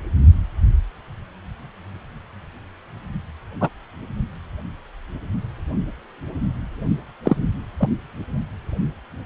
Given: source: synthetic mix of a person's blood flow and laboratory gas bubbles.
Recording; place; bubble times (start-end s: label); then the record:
Doppler ultrasound of blood flow; precordium
3.61-3.68 s: bubbles
7.25-7.37 s: bubbles
7.78-7.89 s: bubbles
From the record:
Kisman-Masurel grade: 123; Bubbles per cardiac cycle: 1 to 2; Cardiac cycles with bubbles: 10 to 50%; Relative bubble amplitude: loud (0.450 to 0.775); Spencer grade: 2 (many but less than half of the cardiac periods contain bubble signals, singularly or in groups); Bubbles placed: only in the low amplitude regions of the cardiac cycle